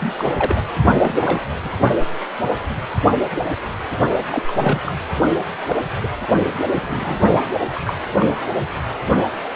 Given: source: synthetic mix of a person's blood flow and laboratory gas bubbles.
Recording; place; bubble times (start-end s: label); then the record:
Doppler ultrasound of blood flow; precordium
0.00-0.60 s: bubbles
0.94-1.49 s: bubbles
1.65-1.70 s: bubbles
4.32-4.45 s: bubbles
4.47-4.82 s: bubbles
4.86-4.92 s: bubbles
5.67-5.76 s: bubbles
6.02-6.08 s: bubbles
6.75-7.18 s: bubbles
7.75-7.93 s: bubbles
8.20-8.26 s: bubbles
From the record:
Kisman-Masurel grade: 232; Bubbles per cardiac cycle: several, 3 to 8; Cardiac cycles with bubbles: 50 to 99%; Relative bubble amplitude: moderate (0.250 to 0.450); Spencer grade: 3 (all of the cardiac periods contain showers or single bubble signals, but not dominating or overriding the cardiac motion signals); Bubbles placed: only in the low amplitude regions of the cardiac cycle